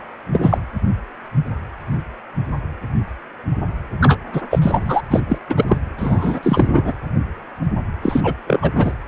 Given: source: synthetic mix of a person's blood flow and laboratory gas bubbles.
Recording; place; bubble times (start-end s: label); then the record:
Doppler ultrasound of blood flow; precordium
0.32-0.58 s: bubbles
4.00-4.17 s: bubbles
4.33-4.42 s: bubbles
4.50-4.59 s: bubbles
4.62-5.01 s: bubbles
5.10-5.23 s: bubbles
5.27-5.38 s: bubbles
5.49-5.65 s: bubbles
5.68-5.77 s: bubbles
5.97-6.39 s: bubbles
6.42-6.92 s: bubbles
8.03-8.33 s: bubbles
8.46-8.71 s: bubbles
8.75-8.93 s: bubbles
From the record:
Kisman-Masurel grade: 223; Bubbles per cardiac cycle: several, 3 to 8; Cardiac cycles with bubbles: 10 to 50%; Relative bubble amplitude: loud (0.450 to 0.775); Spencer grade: 2 (many but less than half of the cardiac periods contain bubble signals, singularly or in groups); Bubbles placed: anywhere in the cardiac cycle